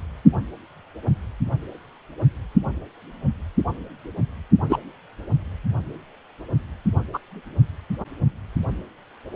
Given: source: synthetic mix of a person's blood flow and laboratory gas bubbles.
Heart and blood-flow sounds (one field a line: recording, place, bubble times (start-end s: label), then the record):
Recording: Doppler ultrasound of blood flow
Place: precordium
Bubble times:
4.69-4.77 s: bubbles
7.13-7.18 s: bubbles
From the record:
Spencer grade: 2 (many but less than half of the cardiac periods contain bubble signals, singularly or in groups)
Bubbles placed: only in the low amplitude regions of the cardiac cycle